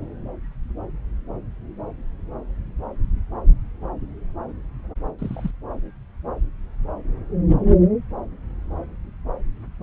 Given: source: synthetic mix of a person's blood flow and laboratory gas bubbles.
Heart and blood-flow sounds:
Doppler ultrasound of blood flow; subclavian vein
5.19-5.51 s: bubbles
From the record:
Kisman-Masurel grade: 112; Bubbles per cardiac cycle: 1 to 2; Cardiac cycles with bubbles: 1 to 10%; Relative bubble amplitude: moderate (0.250 to 0.450); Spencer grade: 1 (occasional bubble signal discernible with the cardiac motion signal, with majority of cardiac periods free of bubbles); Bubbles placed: anywhere in the cardiac cycle

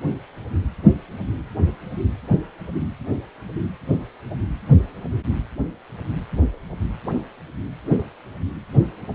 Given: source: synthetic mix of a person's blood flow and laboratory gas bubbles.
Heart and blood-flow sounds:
Doppler ultrasound of blood flow; precordium
no bubbles
From the record:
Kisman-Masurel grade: 000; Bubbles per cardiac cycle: 0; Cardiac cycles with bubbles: 0%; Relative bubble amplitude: no bubbles discernible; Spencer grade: 0 (complete lack of bubble signals)

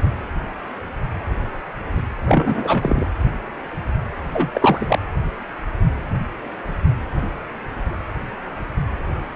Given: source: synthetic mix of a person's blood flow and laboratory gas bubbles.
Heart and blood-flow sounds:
Doppler ultrasound of blood flow; precordium
2.26-3.07 s: bubbles
4.33-4.50 s: bubbles
4.54-4.99 s: bubbles
From the record:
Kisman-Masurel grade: 222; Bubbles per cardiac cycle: several, 3 to 8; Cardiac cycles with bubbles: 10 to 50%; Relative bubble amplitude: moderate (0.250 to 0.450); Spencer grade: 2 (many but less than half of the cardiac periods contain bubble signals, singularly or in groups); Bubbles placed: anywhere in the cardiac cycle

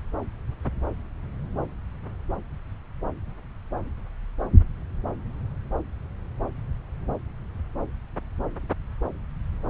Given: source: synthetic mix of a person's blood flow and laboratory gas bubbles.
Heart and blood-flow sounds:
Doppler ultrasound of blood flow; subclavian vein
no bubbles
From the record:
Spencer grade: 0 (complete lack of bubble signals)

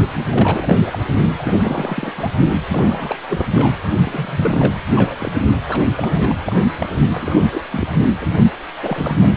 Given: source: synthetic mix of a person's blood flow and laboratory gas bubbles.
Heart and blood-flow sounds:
Doppler ultrasound of blood flow; precordium
0.17-0.75 s: bubbles
0.85-0.99 s: bubbles
1.39-1.54 s: bubbles
1.58-2.12 s: bubbles
2.17-2.38 s: bubbles
2.68-3.17 s: bubbles
3.29-3.46 s: bubbles
3.54-3.75 s: bubbles
4.05-4.73 s: bubbles
4.96-5.32 s: bubbles
5.70-5.81 s: bubbles
5.96-6.36 s: bubbles
6.45-6.69 s: bubbles
6.79-6.88 s: bubbles
7.12-7.62 s: bubbles
7.71-7.87 s: bubbles
7.98-8.04 s: bubbles
8.21-8.26 s: bubbles
8.82-9.15 s: bubbles
9.21-9.29 s: bubbles
From the record:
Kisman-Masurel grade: 332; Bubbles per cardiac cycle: rolling drumbeat, 9 or more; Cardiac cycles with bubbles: 50 to 99%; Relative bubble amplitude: moderate (0.250 to 0.450); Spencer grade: 3 (all of the cardiac periods contain showers or single bubble signals, but not dominating or overriding the cardiac motion signals); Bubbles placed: only in the low amplitude regions of the cardiac cycle

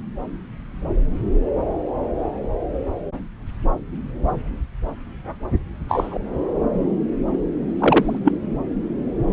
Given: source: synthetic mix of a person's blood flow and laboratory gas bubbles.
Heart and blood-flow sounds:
Doppler ultrasound of blood flow; subclavian vein
5.88-6.18 s: bubbles
7.79-8.19 s: bubbles
8.24-8.32 s: bubbles
From the record:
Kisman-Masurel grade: 123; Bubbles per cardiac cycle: 1 to 2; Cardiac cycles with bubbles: 10 to 50%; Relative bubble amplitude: loud (0.450 to 0.775); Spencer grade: 2 (many but less than half of the cardiac periods contain bubble signals, singularly or in groups); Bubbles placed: anywhere in the cardiac cycle

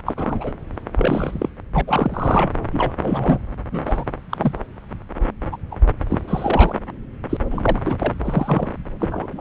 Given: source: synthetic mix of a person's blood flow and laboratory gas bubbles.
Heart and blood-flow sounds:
Doppler ultrasound of blood flow; subclavian vein
0.05-0.14 s: bubbles
0.17-0.52 s: bubbles
0.96-1.49 s: bubbles
1.74-1.82 s: bubbles
1.87-2.50 s: bubbles
2.72-2.92 s: bubbles
3.01-3.39 s: bubbles
3.71-4.04 s: bubbles
4.29-4.52 s: bubbles
5.52-5.57 s: bubbles
5.71-5.76 s: bubbles
6.09-6.19 s: bubbles
6.27-6.75 s: bubbles
7.29-7.37 s: bubbles
7.50-7.82 s: bubbles
7.85-8.14 s: bubbles
8.24-8.69 s: bubbles
8.99-9.41 s: bubbles
From the record:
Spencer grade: 3 (all of the cardiac periods contain showers or single bubble signals, but not dominating or overriding the cardiac motion signals); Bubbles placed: anywhere in the cardiac cycle

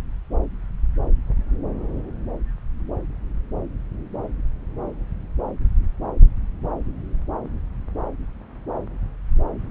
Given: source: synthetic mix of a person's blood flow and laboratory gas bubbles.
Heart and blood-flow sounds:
Doppler ultrasound of blood flow; subclavian vein
no bubbles
From the record:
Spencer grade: 0 (complete lack of bubble signals)

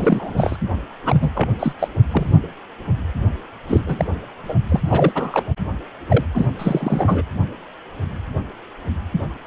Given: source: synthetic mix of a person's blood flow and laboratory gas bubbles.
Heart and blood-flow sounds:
Doppler ultrasound of blood flow; precordium
0.00-0.33 s: bubbles
0.36-0.57 s: bubbles
1.04-1.50 s: bubbles
1.59-1.73 s: bubbles
1.79-1.88 s: bubbles
2.12-2.35 s: bubbles
3.67-3.81 s: bubbles
3.86-4.05 s: bubbles
4.43-4.53 s: bubbles
4.68-4.80 s: bubbles
4.88-5.12 s: bubbles
5.15-5.43 s: bubbles
6.08-6.24 s: bubbles
6.34-6.46 s: bubbles
6.58-7.23 s: bubbles
From the record:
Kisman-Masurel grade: 333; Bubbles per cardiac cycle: rolling drumbeat, 9 or more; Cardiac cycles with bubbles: 50 to 99%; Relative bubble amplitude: loud (0.450 to 0.775); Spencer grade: 3 (all of the cardiac periods contain showers or single bubble signals, but not dominating or overriding the cardiac motion signals); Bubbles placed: anywhere in the cardiac cycle

